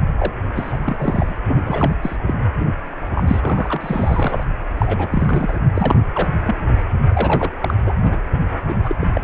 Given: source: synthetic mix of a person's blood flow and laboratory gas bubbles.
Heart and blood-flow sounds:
Doppler ultrasound of blood flow; precordium
0.18-0.32 s: bubbles
0.55-0.78 s: bubbles
0.84-1.35 s: bubbles
1.48-1.92 s: bubbles
2.02-2.16 s: bubbles
2.27-2.34 s: bubbles
2.59-2.67 s: bubbles
3.15-3.23 s: bubbles
3.27-4.43 s: bubbles
4.78-5.58 s: bubbles
5.75-5.95 s: bubbles
6.14-6.29 s: bubbles
6.46-6.55 s: bubbles
7.08-7.52 s: bubbles
7.62-7.74 s: bubbles
7.86-7.94 s: bubbles
8.03-8.19 s: bubbles
8.69-8.75 s: bubbles
8.83-8.96 s: bubbles
9.01-9.12 s: bubbles
9.15-9.21 s: bubbles
From the record:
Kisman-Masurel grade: 342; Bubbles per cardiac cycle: rolling drumbeat, 9 or more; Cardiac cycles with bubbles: 100%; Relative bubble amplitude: moderate (0.250 to 0.450); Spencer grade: 3 (all of the cardiac periods contain showers or single bubble signals, but not dominating or overriding the cardiac motion signals); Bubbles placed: anywhere in the cardiac cycle

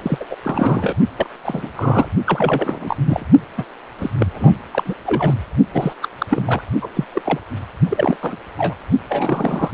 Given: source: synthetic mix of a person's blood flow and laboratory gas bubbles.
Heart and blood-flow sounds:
Doppler ultrasound of blood flow; precordium
0.03-0.24 s: bubbles
0.30-0.37 s: bubbles
0.44-0.96 s: bubbles
1.17-1.26 s: bubbles
1.43-1.71 s: bubbles
1.75-2.08 s: bubbles
2.26-2.96 s: bubbles
3.06-3.25 s: bubbles
3.57-3.65 s: bubbles
3.99-4.10 s: bubbles
4.18-4.26 s: bubbles
4.33-4.52 s: bubbles
4.73-4.94 s: bubbles
5.06-5.34 s: bubbles
5.73-5.93 s: bubbles
6.01-6.08 s: bubbles
6.18-6.26 s: bubbles
6.30-6.62 s: bubbles
6.82-6.89 s: bubbles
6.95-7.05 s: bubbles
7.12-7.21 s: bubbles
7.25-7.40 s: bubbles
7.89-8.17 s: bubbles
8.22-8.37 s: bubbles
8.58-8.75 s: bubbles
9.10-9.71 s: bubbles
From the record:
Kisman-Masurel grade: 342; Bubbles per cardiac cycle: rolling drumbeat, 9 or more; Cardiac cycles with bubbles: 100%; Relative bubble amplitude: moderate (0.250 to 0.450); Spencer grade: 3 (all of the cardiac periods contain showers or single bubble signals, but not dominating or overriding the cardiac motion signals); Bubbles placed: only in the low amplitude regions of the cardiac cycle

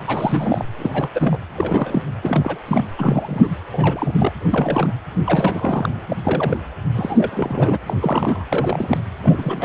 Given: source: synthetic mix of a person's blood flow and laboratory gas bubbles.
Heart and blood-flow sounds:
Doppler ultrasound of blood flow; precordium
0.06-0.65 s: bubbles
0.79-1.10 s: bubbles
1.14-1.38 s: bubbles
1.55-2.02 s: bubbles
2.22-2.59 s: bubbles
2.67-2.85 s: bubbles
2.98-3.50 s: bubbles
3.73-4.32 s: bubbles
4.51-4.94 s: bubbles
5.27-5.89 s: bubbles
6.10-6.16 s: bubbles
6.24-6.57 s: bubbles
6.94-7.78 s: bubbles
7.86-7.94 s: bubbles
8.00-8.45 s: bubbles
8.49-9.00 s: bubbles
9.22-9.65 s: bubbles
From the record:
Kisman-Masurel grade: 342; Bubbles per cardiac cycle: rolling drumbeat, 9 or more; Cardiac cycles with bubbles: 100%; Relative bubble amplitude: moderate (0.250 to 0.450); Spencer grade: 3 (all of the cardiac periods contain showers or single bubble signals, but not dominating or overriding the cardiac motion signals); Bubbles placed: anywhere in the cardiac cycle

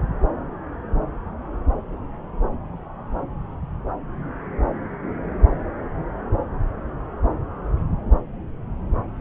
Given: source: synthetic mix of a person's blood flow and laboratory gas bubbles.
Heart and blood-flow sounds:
Doppler ultrasound of blood flow; subclavian vein
no bubbles
From the record:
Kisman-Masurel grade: 000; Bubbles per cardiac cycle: 0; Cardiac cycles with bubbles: 0%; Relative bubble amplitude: no bubbles discernible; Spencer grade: 0 (complete lack of bubble signals)

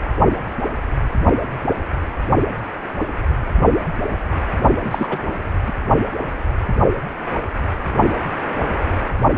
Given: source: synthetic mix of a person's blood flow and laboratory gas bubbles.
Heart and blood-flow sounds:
Doppler ultrasound of blood flow; precordium
4.84-5.18 s: bubbles
5.67-5.72 s: bubbles
From the record:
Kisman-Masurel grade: 212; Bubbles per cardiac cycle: several, 3 to 8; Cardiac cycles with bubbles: 1 to 10%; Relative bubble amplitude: moderate (0.250 to 0.450); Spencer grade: 1 (occasional bubble signal discernible with the cardiac motion signal, with majority of cardiac periods free of bubbles); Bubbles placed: only in the low amplitude regions of the cardiac cycle

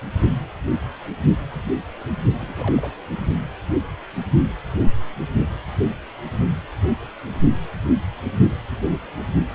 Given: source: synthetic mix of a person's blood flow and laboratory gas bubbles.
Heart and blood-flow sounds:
Doppler ultrasound of blood flow; precordium
2.38-2.92 s: bubbles
3.17-3.23 s: bubbles
From the record:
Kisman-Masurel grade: 211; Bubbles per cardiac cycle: several, 3 to 8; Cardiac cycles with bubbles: 1 to 10%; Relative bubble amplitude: barely perceptible (0.100 to 0.250); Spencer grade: 1 (occasional bubble signal discernible with the cardiac motion signal, with majority of cardiac periods free of bubbles); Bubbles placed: only in the low amplitude regions of the cardiac cycle

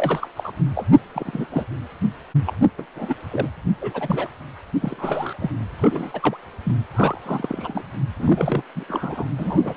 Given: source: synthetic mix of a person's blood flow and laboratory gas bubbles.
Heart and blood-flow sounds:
Doppler ultrasound of blood flow; precordium
0.00-0.28 s: bubbles
0.36-0.52 s: bubbles
0.75-0.84 s: bubbles
1.15-1.46 s: bubbles
1.51-1.65 s: bubbles
2.46-2.54 s: bubbles
2.62-2.67 s: bubbles
2.78-2.85 s: bubbles
2.96-3.15 s: bubbles
3.31-3.50 s: bubbles
3.81-4.27 s: bubbles
4.81-5.34 s: bubbles
5.40-5.50 s: bubbles
5.76-6.37 s: bubbles
6.64-6.75 s: bubbles
6.90-7.83 s: bubbles
8.20-8.62 s: bubbles
8.76-8.84 s: bubbles
8.88-9.25 s: bubbles
9.38-9.74 s: bubbles
From the record:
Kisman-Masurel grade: 242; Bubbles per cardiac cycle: several, 3 to 8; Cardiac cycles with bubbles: 100%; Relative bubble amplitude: moderate (0.250 to 0.450); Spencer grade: 3 (all of the cardiac periods contain showers or single bubble signals, but not dominating or overriding the cardiac motion signals); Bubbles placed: anywhere in the cardiac cycle

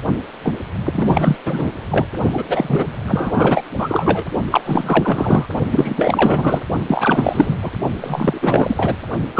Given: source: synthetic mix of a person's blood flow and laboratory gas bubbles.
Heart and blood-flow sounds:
Doppler ultrasound of blood flow; precordium
0.00-0.02 s: bubbles
0.43-0.55 s: bubbles
0.84-1.36 s: bubbles
1.46-1.73 s: bubbles
1.91-2.06 s: bubbles
2.32-2.44 s: bubbles
2.47-2.84 s: bubbles
3.07-3.62 s: bubbles
3.77-4.24 s: bubbles
4.50-4.62 s: bubbles
4.66-5.47 s: bubbles
5.73-5.94 s: bubbles
5.96-6.61 s: bubbles
6.88-7.56 s: bubbles
7.62-7.71 s: bubbles
8.01-8.96 s: bubbles
9.35-9.40 s: bubbles
From the record:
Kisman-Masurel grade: 444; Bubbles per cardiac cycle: continuous sound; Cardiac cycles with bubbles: 100%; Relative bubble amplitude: maximal (0.775 to 0.999); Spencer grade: 4 (maximum detectable bubble signal sounding continuously throughout systole and diastole of every cardiac period, and overriding the amplitude of the normal cardiac signals); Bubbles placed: only in the low amplitude regions of the cardiac cycle

